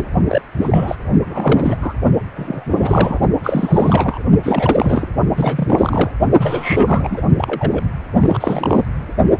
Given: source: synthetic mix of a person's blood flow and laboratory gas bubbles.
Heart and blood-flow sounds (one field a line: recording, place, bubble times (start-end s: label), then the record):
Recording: Doppler ultrasound of blood flow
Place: precordium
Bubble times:
0.00-0.05 s: bubbles
0.27-0.41 s: bubbles
0.57-0.96 s: bubbles
1.25-1.77 s: bubbles
1.81-1.94 s: bubbles
2.35-3.19 s: bubbles
3.43-4.22 s: bubbles
4.43-5.09 s: bubbles
5.34-6.11 s: bubbles
6.40-7.21 s: bubbles
7.37-7.83 s: bubbles
8.21-8.85 s: bubbles
From the record:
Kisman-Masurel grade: 342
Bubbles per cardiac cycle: rolling drumbeat, 9 or more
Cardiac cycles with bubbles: 100%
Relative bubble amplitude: moderate (0.250 to 0.450)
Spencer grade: 3 (all of the cardiac periods contain showers or single bubble signals, but not dominating or overriding the cardiac motion signals)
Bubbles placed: only in the low amplitude regions of the cardiac cycle